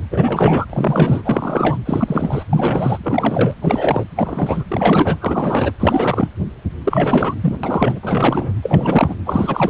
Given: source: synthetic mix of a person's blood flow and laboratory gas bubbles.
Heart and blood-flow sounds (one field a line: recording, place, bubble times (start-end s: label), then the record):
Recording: Doppler ultrasound of blood flow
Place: precordium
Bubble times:
0.11-0.65 s: bubbles
0.69-1.22 s: bubbles
1.25-1.77 s: bubbles
1.85-2.44 s: bubbles
2.50-2.98 s: bubbles
3.03-3.54 s: bubbles
3.62-4.04 s: bubbles
4.16-4.63 s: bubbles
4.68-5.17 s: bubbles
5.21-5.71 s: bubbles
5.79-6.29 s: bubbles
6.84-7.34 s: bubbles
7.41-7.56 s: bubbles
7.63-7.99 s: bubbles
8.02-8.53 s: bubbles
8.62-9.15 s: bubbles
9.26-9.70 s: bubbles
From the record:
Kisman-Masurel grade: 343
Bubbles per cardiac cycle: rolling drumbeat, 9 or more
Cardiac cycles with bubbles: 100%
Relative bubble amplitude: loud (0.450 to 0.775)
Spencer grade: 3 (all of the cardiac periods contain showers or single bubble signals, but not dominating or overriding the cardiac motion signals)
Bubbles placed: anywhere in the cardiac cycle